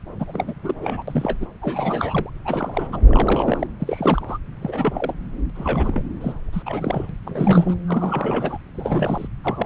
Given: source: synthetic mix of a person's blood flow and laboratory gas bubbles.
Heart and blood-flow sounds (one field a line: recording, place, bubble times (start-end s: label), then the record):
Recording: Doppler ultrasound of blood flow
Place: subclavian vein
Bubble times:
0.18-0.54 s: bubbles
0.62-0.74 s: bubbles
0.81-1.02 s: bubbles
1.07-1.47 s: bubbles
1.61-2.30 s: bubbles
2.45-3.00 s: bubbles
3.08-3.67 s: bubbles
3.80-4.38 s: bubbles
4.61-5.16 s: bubbles
5.55-6.03 s: bubbles
6.21-6.33 s: bubbles
6.53-6.62 s: bubbles
6.66-7.13 s: bubbles
7.25-7.75 s: bubbles
7.87-8.58 s: bubbles
8.71-9.28 s: bubbles
9.44-9.66 s: bubbles
From the record:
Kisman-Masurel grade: 342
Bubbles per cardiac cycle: rolling drumbeat, 9 or more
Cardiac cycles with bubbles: 100%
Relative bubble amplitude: moderate (0.250 to 0.450)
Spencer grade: 3 (all of the cardiac periods contain showers or single bubble signals, but not dominating or overriding the cardiac motion signals)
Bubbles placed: anywhere in the cardiac cycle